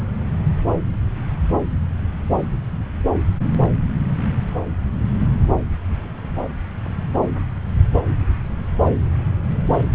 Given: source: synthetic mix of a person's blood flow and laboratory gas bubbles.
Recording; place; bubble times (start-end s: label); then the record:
Doppler ultrasound of blood flow; subclavian vein
9.90-9.95 s: bubbles
From the record:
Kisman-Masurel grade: 211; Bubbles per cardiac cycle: several, 3 to 8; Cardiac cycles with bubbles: 1 to 10%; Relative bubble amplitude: barely perceptible (0.100 to 0.250); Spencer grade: 1 (occasional bubble signal discernible with the cardiac motion signal, with majority of cardiac periods free of bubbles); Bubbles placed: anywhere in the cardiac cycle